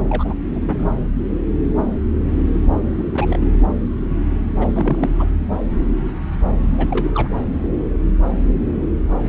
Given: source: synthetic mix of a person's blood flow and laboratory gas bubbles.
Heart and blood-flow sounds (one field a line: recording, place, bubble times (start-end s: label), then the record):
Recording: Doppler ultrasound of blood flow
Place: subclavian vein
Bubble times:
0.09-0.35 s: bubbles
0.49-0.85 s: bubbles
2.90-3.05 s: bubbles
3.14-3.48 s: bubbles
4.59-5.09 s: bubbles
5.19-5.26 s: bubbles
6.77-6.88 s: bubbles
6.90-7.11 s: bubbles
7.13-7.28 s: bubbles
From the record:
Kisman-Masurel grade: 222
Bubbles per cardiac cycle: several, 3 to 8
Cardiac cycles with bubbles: 10 to 50%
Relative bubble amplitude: moderate (0.250 to 0.450)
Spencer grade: 2 (many but less than half of the cardiac periods contain bubble signals, singularly or in groups)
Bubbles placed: anywhere in the cardiac cycle